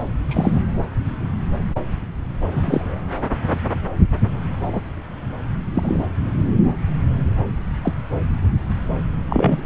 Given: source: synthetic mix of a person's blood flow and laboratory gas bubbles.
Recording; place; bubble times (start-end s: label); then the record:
Doppler ultrasound of blood flow; subclavian vein
0.28-0.61 s: bubbles
2.51-3.00 s: bubbles
4.73-4.81 s: bubbles
5.74-6.07 s: bubbles
7.84-7.94 s: bubbles
9.29-9.63 s: bubbles
From the record:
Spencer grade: 2 (many but less than half of the cardiac periods contain bubble signals, singularly or in groups); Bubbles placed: anywhere in the cardiac cycle